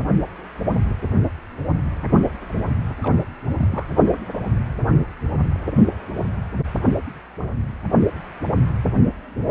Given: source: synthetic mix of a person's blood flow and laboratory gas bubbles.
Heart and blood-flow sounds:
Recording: Doppler ultrasound of blood flow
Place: precordium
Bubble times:
3.02-3.17 s: bubbles
3.58-3.87 s: bubbles
From the record:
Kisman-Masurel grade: 221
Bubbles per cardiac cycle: several, 3 to 8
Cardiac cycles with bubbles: 10 to 50%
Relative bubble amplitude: barely perceptible (0.100 to 0.250)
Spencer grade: 2 (many but less than half of the cardiac periods contain bubble signals, singularly or in groups)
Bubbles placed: anywhere in the cardiac cycle

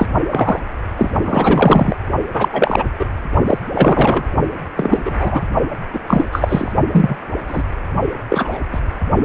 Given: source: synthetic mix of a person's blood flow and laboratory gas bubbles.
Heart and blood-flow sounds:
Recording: Doppler ultrasound of blood flow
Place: precordium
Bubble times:
0.00-0.09 s: bubbles
0.29-0.60 s: bubbles
0.96-1.10 s: bubbles
1.25-1.96 s: bubbles
2.33-2.49 s: bubbles
2.53-2.85 s: bubbles
2.99-3.06 s: bubbles
3.47-3.58 s: bubbles
3.75-4.24 s: bubbles
4.76-5.43 s: bubbles
5.93-5.99 s: bubbles
6.07-6.27 s: bubbles
6.31-6.72 s: bubbles
6.92-7.17 s: bubbles
7.47-7.63 s: bubbles
8.29-8.58 s: bubbles
8.72-8.80 s: bubbles
From the record:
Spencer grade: 3 (all of the cardiac periods contain showers or single bubble signals, but not dominating or overriding the cardiac motion signals)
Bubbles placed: only in the low amplitude regions of the cardiac cycle

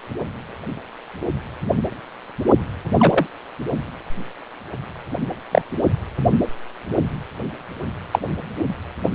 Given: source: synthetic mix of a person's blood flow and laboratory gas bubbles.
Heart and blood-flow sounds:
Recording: Doppler ultrasound of blood flow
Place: precordium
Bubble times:
2.98-3.27 s: bubbles
5.51-5.61 s: bubbles
8.11-8.19 s: bubbles
From the record:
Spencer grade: 2 (many but less than half of the cardiac periods contain bubble signals, singularly or in groups)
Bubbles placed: only in the low amplitude regions of the cardiac cycle

